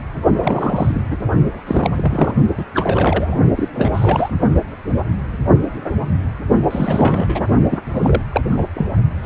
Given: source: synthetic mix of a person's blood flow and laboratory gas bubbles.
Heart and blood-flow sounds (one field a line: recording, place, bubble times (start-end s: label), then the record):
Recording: Doppler ultrasound of blood flow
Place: precordium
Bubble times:
0.38-1.02 s: bubbles
1.10-1.17 s: bubbles
1.52-1.91 s: bubbles
1.96-2.33 s: bubbles
2.58-2.65 s: bubbles
2.74-3.37 s: bubbles
3.56-3.69 s: bubbles
3.72-3.90 s: bubbles
3.93-4.30 s: bubbles
6.70-7.45 s: bubbles
7.69-7.80 s: bubbles
7.94-8.21 s: bubbles
8.32-8.43 s: bubbles
8.49-8.65 s: bubbles
8.75-8.86 s: bubbles
9.23-9.26 s: bubbles
From the record:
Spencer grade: 3 (all of the cardiac periods contain showers or single bubble signals, but not dominating or overriding the cardiac motion signals)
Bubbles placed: only in the low amplitude regions of the cardiac cycle